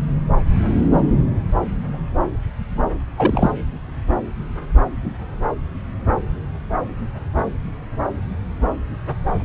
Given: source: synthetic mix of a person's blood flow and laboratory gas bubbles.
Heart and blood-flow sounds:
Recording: Doppler ultrasound of blood flow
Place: subclavian vein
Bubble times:
3.18-3.50 s: bubbles
From the record:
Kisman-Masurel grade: 223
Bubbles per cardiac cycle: several, 3 to 8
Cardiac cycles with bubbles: 10 to 50%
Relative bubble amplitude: loud (0.450 to 0.775)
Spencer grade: 2 (many but less than half of the cardiac periods contain bubble signals, singularly or in groups)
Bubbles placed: anywhere in the cardiac cycle

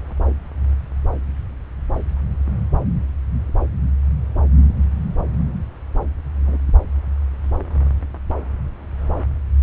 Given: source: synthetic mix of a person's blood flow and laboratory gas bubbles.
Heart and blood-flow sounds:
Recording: Doppler ultrasound of blood flow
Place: subclavian vein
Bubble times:
6.36-6.58 s: bubbles
From the record:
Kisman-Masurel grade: 121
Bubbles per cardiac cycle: 1 to 2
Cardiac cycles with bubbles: 10 to 50%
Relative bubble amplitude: barely perceptible (0.100 to 0.250)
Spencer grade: 2 (many but less than half of the cardiac periods contain bubble signals, singularly or in groups)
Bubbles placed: anywhere in the cardiac cycle

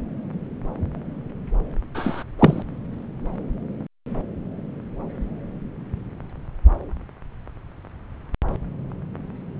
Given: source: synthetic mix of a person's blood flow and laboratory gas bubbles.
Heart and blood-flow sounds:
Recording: Doppler ultrasound of blood flow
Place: subclavian vein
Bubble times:
1.94-2.23 s: bubbles
2.38-2.62 s: bubbles
From the record:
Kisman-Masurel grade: 113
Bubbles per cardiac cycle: 1 to 2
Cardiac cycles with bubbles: 1 to 10%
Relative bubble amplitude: loud (0.450 to 0.775)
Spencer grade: 1 (occasional bubble signal discernible with the cardiac motion signal, with majority of cardiac periods free of bubbles)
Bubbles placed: anywhere in the cardiac cycle

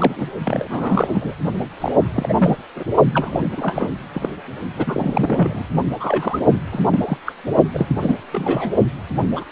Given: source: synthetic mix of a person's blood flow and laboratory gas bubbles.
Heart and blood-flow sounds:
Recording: Doppler ultrasound of blood flow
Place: precordium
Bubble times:
0.00-0.27 s: bubbles
0.44-1.34 s: bubbles
1.81-1.92 s: bubbles
2.14-2.35 s: bubbles
2.39-2.58 s: bubbles
2.76-2.84 s: bubbles
3.14-3.92 s: bubbles
4.14-4.29 s: bubbles
4.76-5.65 s: bubbles
6.00-6.40 s: bubbles
6.71-6.87 s: bubbles
6.91-7.00 s: bubbles
7.05-7.17 s: bubbles
7.25-7.32 s: bubbles
7.74-8.16 s: bubbles
8.32-8.72 s: bubbles
9.17-9.44 s: bubbles
From the record:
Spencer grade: 3 (all of the cardiac periods contain showers or single bubble signals, but not dominating or overriding the cardiac motion signals)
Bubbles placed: only in the low amplitude regions of the cardiac cycle

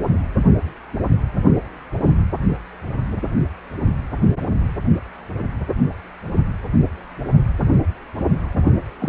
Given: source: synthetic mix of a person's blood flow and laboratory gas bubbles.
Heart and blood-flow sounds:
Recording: Doppler ultrasound of blood flow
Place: precordium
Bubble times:
8.57-8.62 s: bubbles
8.99-9.09 s: bubbles
From the record:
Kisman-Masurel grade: 221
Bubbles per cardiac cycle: several, 3 to 8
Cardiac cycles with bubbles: 10 to 50%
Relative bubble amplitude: barely perceptible (0.100 to 0.250)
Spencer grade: 2 (many but less than half of the cardiac periods contain bubble signals, singularly or in groups)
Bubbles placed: only in the low amplitude regions of the cardiac cycle

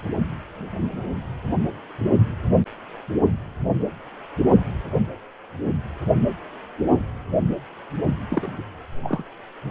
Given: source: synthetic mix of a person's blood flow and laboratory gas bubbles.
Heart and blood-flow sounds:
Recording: Doppler ultrasound of blood flow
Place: precordium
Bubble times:
8.30-8.51 s: bubbles
8.57-8.63 s: bubbles
9.03-9.22 s: bubbles
From the record:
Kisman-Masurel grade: 221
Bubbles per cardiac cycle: several, 3 to 8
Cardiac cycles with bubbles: 10 to 50%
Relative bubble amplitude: barely perceptible (0.100 to 0.250)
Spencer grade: 2 (many but less than half of the cardiac periods contain bubble signals, singularly or in groups)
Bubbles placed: only in the low amplitude regions of the cardiac cycle

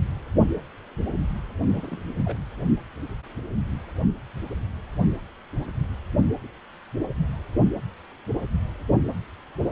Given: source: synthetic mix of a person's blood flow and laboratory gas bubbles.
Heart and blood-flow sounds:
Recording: Doppler ultrasound of blood flow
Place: precordium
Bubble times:
1.71-2.22 s: bubbles
2.25-2.36 s: bubbles
From the record:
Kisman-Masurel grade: 211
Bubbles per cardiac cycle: several, 3 to 8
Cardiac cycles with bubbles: 1 to 10%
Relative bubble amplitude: barely perceptible (0.100 to 0.250)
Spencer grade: 1 (occasional bubble signal discernible with the cardiac motion signal, with majority of cardiac periods free of bubbles)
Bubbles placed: anywhere in the cardiac cycle

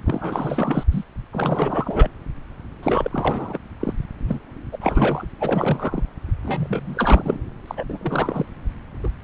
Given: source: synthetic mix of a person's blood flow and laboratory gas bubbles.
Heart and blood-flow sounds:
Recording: Doppler ultrasound of blood flow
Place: subclavian vein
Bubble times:
0.05-0.83 s: bubbles
0.91-1.04 s: bubbles
1.32-2.09 s: bubbles
2.82-3.09 s: bubbles
3.12-3.58 s: bubbles
3.79-3.93 s: bubbles
4.27-4.39 s: bubbles
4.72-4.78 s: bubbles
4.80-5.25 s: bubbles
5.39-6.03 s: bubbles
6.43-7.38 s: bubbles
7.67-7.83 s: bubbles
7.88-7.98 s: bubbles
8.01-8.46 s: bubbles
9.04-9.09 s: bubbles
From the record:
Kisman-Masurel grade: 342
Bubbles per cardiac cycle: rolling drumbeat, 9 or more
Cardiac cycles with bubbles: 100%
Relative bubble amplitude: moderate (0.250 to 0.450)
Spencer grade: 3 (all of the cardiac periods contain showers or single bubble signals, but not dominating or overriding the cardiac motion signals)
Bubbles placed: anywhere in the cardiac cycle

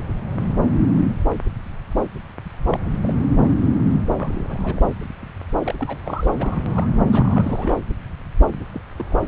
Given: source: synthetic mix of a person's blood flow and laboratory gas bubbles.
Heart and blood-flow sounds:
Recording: Doppler ultrasound of blood flow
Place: subclavian vein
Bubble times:
2.71-2.80 s: bubbles
3.02-3.14 s: bubbles
4.17-4.80 s: bubbles
5.64-5.74 s: bubbles
5.79-5.96 s: bubbles
6.04-6.29 s: bubbles
6.39-6.89 s: bubbles
7.12-7.79 s: bubbles
8.73-8.80 s: bubbles
8.96-9.05 s: bubbles
9.09-9.19 s: bubbles
From the record:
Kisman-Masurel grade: 221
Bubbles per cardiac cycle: several, 3 to 8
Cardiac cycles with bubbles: 10 to 50%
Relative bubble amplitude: barely perceptible (0.100 to 0.250)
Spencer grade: 2 (many but less than half of the cardiac periods contain bubble signals, singularly or in groups)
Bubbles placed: anywhere in the cardiac cycle

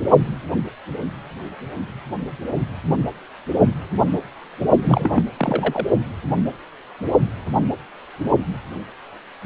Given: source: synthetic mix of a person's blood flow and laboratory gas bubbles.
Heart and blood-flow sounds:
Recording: Doppler ultrasound of blood flow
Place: precordium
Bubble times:
4.83-5.25 s: bubbles
5.38-5.85 s: bubbles
From the record:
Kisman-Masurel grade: 212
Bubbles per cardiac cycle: several, 3 to 8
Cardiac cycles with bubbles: 1 to 10%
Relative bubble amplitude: moderate (0.250 to 0.450)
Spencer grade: 1 (occasional bubble signal discernible with the cardiac motion signal, with majority of cardiac periods free of bubbles)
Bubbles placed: only in the low amplitude regions of the cardiac cycle

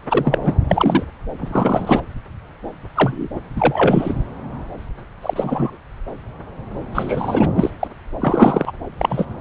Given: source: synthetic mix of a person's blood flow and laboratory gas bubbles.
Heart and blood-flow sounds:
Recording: Doppler ultrasound of blood flow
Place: subclavian vein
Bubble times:
0.08-0.56 s: bubbles
0.68-1.04 s: bubbles
1.40-2.00 s: bubbles
2.95-3.27 s: bubbles
3.35-3.40 s: bubbles
3.56-4.13 s: bubbles
5.22-5.78 s: bubbles
6.94-7.48 s: bubbles
7.55-7.71 s: bubbles
7.79-7.88 s: bubbles
8.20-8.72 s: bubbles
8.98-9.25 s: bubbles
From the record:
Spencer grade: 3 (all of the cardiac periods contain showers or single bubble signals, but not dominating or overriding the cardiac motion signals)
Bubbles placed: anywhere in the cardiac cycle

